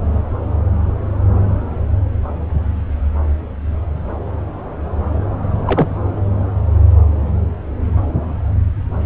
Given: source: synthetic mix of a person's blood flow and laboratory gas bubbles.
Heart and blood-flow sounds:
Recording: Doppler ultrasound of blood flow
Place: subclavian vein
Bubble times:
5.67-5.97 s: bubbles
From the record:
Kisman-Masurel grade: 213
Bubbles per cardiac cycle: several, 3 to 8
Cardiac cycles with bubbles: 1 to 10%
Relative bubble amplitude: loud (0.450 to 0.775)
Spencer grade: 1 (occasional bubble signal discernible with the cardiac motion signal, with majority of cardiac periods free of bubbles)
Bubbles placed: anywhere in the cardiac cycle

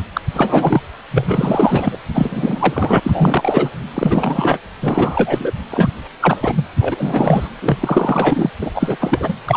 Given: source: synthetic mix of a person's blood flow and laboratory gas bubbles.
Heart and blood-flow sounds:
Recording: Doppler ultrasound of blood flow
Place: precordium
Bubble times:
0.13-0.21 s: bubbles
0.33-0.81 s: bubbles
1.10-1.98 s: bubbles
2.14-3.00 s: bubbles
3.02-3.69 s: bubbles
3.94-4.58 s: bubbles
4.82-5.54 s: bubbles
5.71-5.90 s: bubbles
6.21-6.37 s: bubbles
6.41-6.64 s: bubbles
6.78-7.49 s: bubbles
7.62-7.78 s: bubbles
7.80-8.51 s: bubbles
8.61-8.71 s: bubbles
8.74-8.96 s: bubbles
8.99-9.33 s: bubbles
9.46-9.57 s: bubbles
From the record:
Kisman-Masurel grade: 343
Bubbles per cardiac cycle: rolling drumbeat, 9 or more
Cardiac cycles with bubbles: 100%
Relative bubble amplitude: loud (0.450 to 0.775)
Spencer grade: 3 (all of the cardiac periods contain showers or single bubble signals, but not dominating or overriding the cardiac motion signals)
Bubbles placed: anywhere in the cardiac cycle

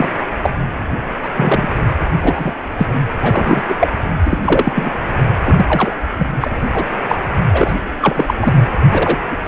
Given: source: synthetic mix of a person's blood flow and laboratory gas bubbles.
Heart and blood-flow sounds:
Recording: Doppler ultrasound of blood flow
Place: precordium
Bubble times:
0.00-0.10 s: bubbles
0.43-0.56 s: bubbles
1.23-1.29 s: bubbles
1.36-1.67 s: bubbles
2.21-2.54 s: bubbles
2.77-2.87 s: bubbles
3.21-3.62 s: bubbles
3.68-3.75 s: bubbles
3.79-3.88 s: bubbles
4.25-4.38 s: bubbles
4.42-4.72 s: bubbles
4.75-4.89 s: bubbles
5.45-5.96 s: bubbles
6.18-6.26 s: bubbles
6.43-6.50 s: bubbles
6.74-6.85 s: bubbles
7.08-7.16 s: bubbles
7.53-7.74 s: bubbles
8.01-8.34 s: bubbles
8.41-8.55 s: bubbles
8.92-9.18 s: bubbles
9.31-9.37 s: bubbles
9.45-9.48 s: bubbles
From the record:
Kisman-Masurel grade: 243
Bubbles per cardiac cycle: several, 3 to 8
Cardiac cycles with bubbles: 100%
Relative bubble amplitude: loud (0.450 to 0.775)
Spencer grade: 3 (all of the cardiac periods contain showers or single bubble signals, but not dominating or overriding the cardiac motion signals)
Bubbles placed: anywhere in the cardiac cycle

